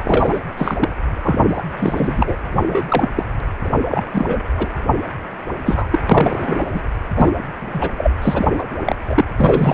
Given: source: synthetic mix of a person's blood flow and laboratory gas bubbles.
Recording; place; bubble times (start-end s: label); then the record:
Doppler ultrasound of blood flow; precordium
0.04-0.40 s: bubbles
0.57-0.89 s: bubbles
1.22-1.63 s: bubbles
1.76-2.36 s: bubbles
2.54-2.63 s: bubbles
2.67-2.83 s: bubbles
2.88-3.08 s: bubbles
3.15-3.25 s: bubbles
3.63-3.69 s: bubbles
3.81-4.04 s: bubbles
4.12-4.41 s: bubbles
4.56-4.70 s: bubbles
5.65-5.99 s: bubbles
6.09-6.82 s: bubbles
7.16-7.32 s: bubbles
7.55-7.90 s: bubbles
7.97-8.11 s: bubbles
8.21-8.48 s: bubbles
8.53-8.63 s: bubbles
8.86-8.96 s: bubbles
9.07-9.25 s: bubbles
9.37-9.74 s: bubbles
From the record:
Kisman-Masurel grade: 243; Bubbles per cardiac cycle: several, 3 to 8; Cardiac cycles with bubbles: 100%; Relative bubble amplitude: loud (0.450 to 0.775); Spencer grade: 3 (all of the cardiac periods contain showers or single bubble signals, but not dominating or overriding the cardiac motion signals); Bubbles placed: anywhere in the cardiac cycle